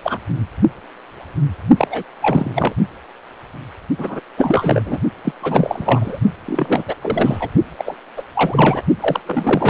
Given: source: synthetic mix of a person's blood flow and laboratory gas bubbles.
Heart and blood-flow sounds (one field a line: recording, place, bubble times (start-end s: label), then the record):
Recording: Doppler ultrasound of blood flow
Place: precordium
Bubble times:
0.03-0.18 s: bubbles
1.77-1.87 s: bubbles
1.90-2.04 s: bubbles
2.22-2.75 s: bubbles
3.98-4.20 s: bubbles
4.37-4.82 s: bubbles
4.85-5.00 s: bubbles
5.25-5.33 s: bubbles
5.42-6.20 s: bubbles
6.46-6.83 s: bubbles
6.88-6.95 s: bubbles
7.01-7.50 s: bubbles
7.78-7.96 s: bubbles
8.17-8.22 s: bubbles
8.35-8.81 s: bubbles
9.00-9.20 s: bubbles
9.26-9.70 s: bubbles
From the record:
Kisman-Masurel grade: 333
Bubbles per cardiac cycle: rolling drumbeat, 9 or more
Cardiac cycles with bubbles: 50 to 99%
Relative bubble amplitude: loud (0.450 to 0.775)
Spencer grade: 3 (all of the cardiac periods contain showers or single bubble signals, but not dominating or overriding the cardiac motion signals)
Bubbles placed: only in the low amplitude regions of the cardiac cycle